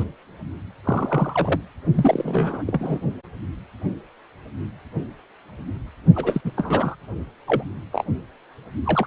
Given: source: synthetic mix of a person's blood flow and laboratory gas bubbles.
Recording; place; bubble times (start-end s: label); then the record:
Doppler ultrasound of blood flow; precordium
0.00-0.04 s: bubbles
0.84-1.60 s: bubbles
1.94-2.63 s: bubbles
2.66-3.00 s: bubbles
6.15-6.41 s: bubbles
6.45-6.51 s: bubbles
6.57-6.96 s: bubbles
7.46-7.63 s: bubbles
7.92-8.04 s: bubbles
8.85-9.07 s: bubbles
From the record:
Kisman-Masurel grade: 222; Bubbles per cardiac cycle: several, 3 to 8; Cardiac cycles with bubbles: 10 to 50%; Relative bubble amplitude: moderate (0.250 to 0.450); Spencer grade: 2 (many but less than half of the cardiac periods contain bubble signals, singularly or in groups); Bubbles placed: only in the low amplitude regions of the cardiac cycle